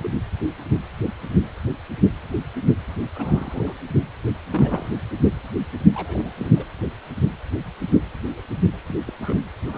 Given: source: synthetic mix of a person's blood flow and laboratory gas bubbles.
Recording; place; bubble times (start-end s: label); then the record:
Doppler ultrasound of blood flow; precordium
0.04-0.12 s: bubbles
3.15-3.74 s: bubbles
4.49-5.00 s: bubbles
5.94-6.33 s: bubbles
6.36-6.73 s: bubbles
8.88-8.94 s: bubbles
9.06-9.13 s: bubbles
9.21-9.39 s: bubbles
9.66-9.78 s: bubbles
From the record:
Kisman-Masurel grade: 221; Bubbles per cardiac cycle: several, 3 to 8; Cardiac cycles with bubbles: 10 to 50%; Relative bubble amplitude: barely perceptible (0.100 to 0.250); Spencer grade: 2 (many but less than half of the cardiac periods contain bubble signals, singularly or in groups); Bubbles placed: anywhere in the cardiac cycle